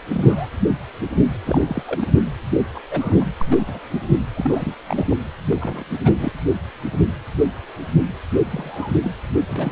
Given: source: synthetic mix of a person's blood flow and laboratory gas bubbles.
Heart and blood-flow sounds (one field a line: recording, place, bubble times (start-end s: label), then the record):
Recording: Doppler ultrasound of blood flow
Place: precordium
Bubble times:
0.12-0.49 s: bubbles
1.45-1.83 s: bubbles
1.86-2.08 s: bubbles
2.75-2.82 s: bubbles
2.91-3.27 s: bubbles
3.39-3.81 s: bubbles
3.91-4.00 s: bubbles
4.35-4.75 s: bubbles
4.87-5.17 s: bubbles
5.50-5.84 s: bubbles
6.04-6.32 s: bubbles
8.31-8.37 s: bubbles
8.44-8.97 s: bubbles
9.02-9.11 s: bubbles
9.48-9.72 s: bubbles
From the record:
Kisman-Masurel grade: 232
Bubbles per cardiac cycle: several, 3 to 8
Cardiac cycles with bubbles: 50 to 99%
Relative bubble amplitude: moderate (0.250 to 0.450)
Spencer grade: 3 (all of the cardiac periods contain showers or single bubble signals, but not dominating or overriding the cardiac motion signals)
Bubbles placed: anywhere in the cardiac cycle